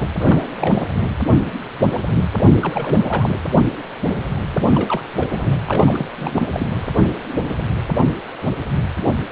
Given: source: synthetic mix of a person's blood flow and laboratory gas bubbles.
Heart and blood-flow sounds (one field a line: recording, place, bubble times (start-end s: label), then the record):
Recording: Doppler ultrasound of blood flow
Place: precordium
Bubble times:
0.19-0.49 s: bubbles
0.59-0.83 s: bubbles
2.31-2.44 s: bubbles
2.61-3.40 s: bubbles
4.52-4.66 s: bubbles
4.75-5.01 s: bubbles
5.19-5.60 s: bubbles
5.65-6.08 s: bubbles
6.18-6.42 s: bubbles
6.53-6.67 s: bubbles
From the record:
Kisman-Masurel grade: 332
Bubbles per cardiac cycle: rolling drumbeat, 9 or more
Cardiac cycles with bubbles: 50 to 99%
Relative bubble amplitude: moderate (0.250 to 0.450)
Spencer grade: 3 (all of the cardiac periods contain showers or single bubble signals, but not dominating or overriding the cardiac motion signals)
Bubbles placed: anywhere in the cardiac cycle